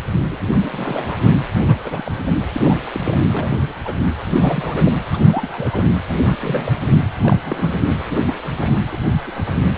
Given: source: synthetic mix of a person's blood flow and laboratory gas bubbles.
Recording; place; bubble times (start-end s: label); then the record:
Doppler ultrasound of blood flow; precordium
0.30-0.39 s: bubbles
0.53-1.18 s: bubbles
1.67-2.31 s: bubbles
2.56-2.77 s: bubbles
2.94-3.00 s: bubbles
3.05-3.19 s: bubbles
3.30-3.74 s: bubbles
3.85-3.93 s: bubbles
4.34-4.96 s: bubbles
5.08-5.85 s: bubbles
6.26-6.37 s: bubbles
6.40-6.72 s: bubbles
6.82-6.88 s: bubbles
7.16-7.41 s: bubbles
7.44-7.76 s: bubbles
8.08-8.22 s: bubbles
8.26-8.34 s: bubbles
8.44-8.52 s: bubbles
8.55-8.73 s: bubbles
8.92-8.98 s: bubbles
9.27-9.32 s: bubbles
9.34-9.56 s: bubbles
From the record:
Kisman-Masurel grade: 242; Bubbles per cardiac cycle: several, 3 to 8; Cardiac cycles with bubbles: 100%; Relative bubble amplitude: moderate (0.250 to 0.450); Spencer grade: 3 (all of the cardiac periods contain showers or single bubble signals, but not dominating or overriding the cardiac motion signals); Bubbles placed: anywhere in the cardiac cycle